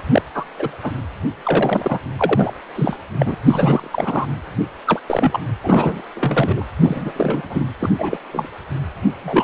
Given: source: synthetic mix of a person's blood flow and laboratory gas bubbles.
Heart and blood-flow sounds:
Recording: Doppler ultrasound of blood flow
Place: precordium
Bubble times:
0.12-0.22 s: bubbles
0.34-0.46 s: bubbles
0.58-0.68 s: bubbles
0.83-0.91 s: bubbles
1.43-1.98 s: bubbles
2.17-2.52 s: bubbles
2.75-2.98 s: bubbles
3.19-3.35 s: bubbles
3.47-4.26 s: bubbles
4.87-5.01 s: bubbles
5.08-5.39 s: bubbles
5.63-6.01 s: bubbles
6.16-6.64 s: bubbles
6.80-7.12 s: bubbles
7.16-7.65 s: bubbles
7.79-7.90 s: bubbles
7.99-8.17 s: bubbles
8.32-8.48 s: bubbles
9.24-9.44 s: bubbles
From the record:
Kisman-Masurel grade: 242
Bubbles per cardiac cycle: several, 3 to 8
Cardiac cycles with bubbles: 100%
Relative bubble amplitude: moderate (0.250 to 0.450)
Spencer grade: 3 (all of the cardiac periods contain showers or single bubble signals, but not dominating or overriding the cardiac motion signals)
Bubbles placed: anywhere in the cardiac cycle

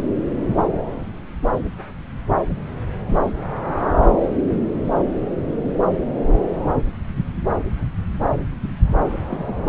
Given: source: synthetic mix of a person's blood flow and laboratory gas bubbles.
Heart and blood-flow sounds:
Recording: Doppler ultrasound of blood flow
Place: subclavian vein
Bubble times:
9.22-9.54 s: bubbles
From the record:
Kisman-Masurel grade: 112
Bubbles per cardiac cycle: 1 to 2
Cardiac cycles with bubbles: 1 to 10%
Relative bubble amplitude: moderate (0.250 to 0.450)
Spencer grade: 1 (occasional bubble signal discernible with the cardiac motion signal, with majority of cardiac periods free of bubbles)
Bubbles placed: anywhere in the cardiac cycle

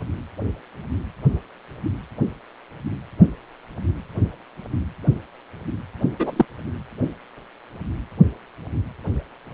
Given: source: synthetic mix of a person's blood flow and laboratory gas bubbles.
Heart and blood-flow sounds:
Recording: Doppler ultrasound of blood flow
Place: precordium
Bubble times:
6.19-6.45 s: bubbles
From the record:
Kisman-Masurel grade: 113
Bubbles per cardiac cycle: 1 to 2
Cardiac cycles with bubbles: 1 to 10%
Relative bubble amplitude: loud (0.450 to 0.775)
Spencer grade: 1 (occasional bubble signal discernible with the cardiac motion signal, with majority of cardiac periods free of bubbles)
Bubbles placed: anywhere in the cardiac cycle

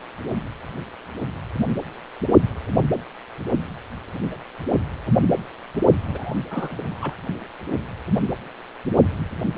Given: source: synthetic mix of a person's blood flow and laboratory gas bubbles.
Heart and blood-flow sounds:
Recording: Doppler ultrasound of blood flow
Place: precordium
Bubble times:
6.00-6.35 s: bubbles
6.50-7.14 s: bubbles
7.26-7.35 s: bubbles
From the record:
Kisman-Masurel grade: 212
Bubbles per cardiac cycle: several, 3 to 8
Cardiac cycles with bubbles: 1 to 10%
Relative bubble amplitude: moderate (0.250 to 0.450)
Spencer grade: 1 (occasional bubble signal discernible with the cardiac motion signal, with majority of cardiac periods free of bubbles)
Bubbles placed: only in the low amplitude regions of the cardiac cycle

